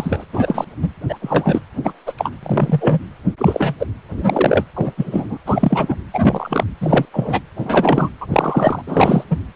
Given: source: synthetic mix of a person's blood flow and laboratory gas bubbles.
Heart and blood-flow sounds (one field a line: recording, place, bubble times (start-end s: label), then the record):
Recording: Doppler ultrasound of blood flow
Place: precordium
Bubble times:
0.00-0.24 s: bubbles
0.33-0.65 s: bubbles
0.82-0.89 s: bubbles
1.09-1.18 s: bubbles
1.22-1.60 s: bubbles
1.83-1.93 s: bubbles
2.06-2.12 s: bubbles
2.18-2.31 s: bubbles
2.42-2.99 s: bubbles
3.38-3.75 s: bubbles
3.80-3.86 s: bubbles
4.16-4.64 s: bubbles
4.76-4.91 s: bubbles
4.97-5.38 s: bubbles
5.46-5.95 s: bubbles
6.13-6.64 s: bubbles
6.80-7.05 s: bubbles
7.13-7.39 s: bubbles
7.57-8.09 s: bubbles
8.21-8.27 s: bubbles
8.30-8.82 s: bubbles
8.87-9.24 s: bubbles
9.30-9.38 s: bubbles
From the record:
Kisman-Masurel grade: 243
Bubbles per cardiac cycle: several, 3 to 8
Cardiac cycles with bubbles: 100%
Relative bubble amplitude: loud (0.450 to 0.775)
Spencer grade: 3 (all of the cardiac periods contain showers or single bubble signals, but not dominating or overriding the cardiac motion signals)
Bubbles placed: anywhere in the cardiac cycle